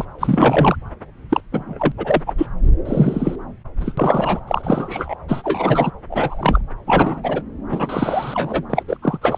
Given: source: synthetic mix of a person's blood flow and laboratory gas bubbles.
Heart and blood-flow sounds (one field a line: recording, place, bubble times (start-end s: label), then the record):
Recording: Doppler ultrasound of blood flow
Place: subclavian vein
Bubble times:
0.00-0.05 s: bubbles
0.18-0.76 s: bubbles
1.30-1.41 s: bubbles
1.52-1.92 s: bubbles
1.97-2.22 s: bubbles
2.26-2.33 s: bubbles
2.38-2.46 s: bubbles
2.85-3.35 s: bubbles
3.79-3.93 s: bubbles
3.97-4.40 s: bubbles
4.48-5.15 s: bubbles
5.28-5.91 s: bubbles
6.10-6.62 s: bubbles
6.87-7.43 s: bubbles
7.71-8.63 s: bubbles
8.70-8.84 s: bubbles
8.88-8.97 s: bubbles
9.02-9.18 s: bubbles
9.21-9.38 s: bubbles
From the record:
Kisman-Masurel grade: 233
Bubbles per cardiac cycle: several, 3 to 8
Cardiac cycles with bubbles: 50 to 99%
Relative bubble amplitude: loud (0.450 to 0.775)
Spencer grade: 3 (all of the cardiac periods contain showers or single bubble signals, but not dominating or overriding the cardiac motion signals)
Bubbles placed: anywhere in the cardiac cycle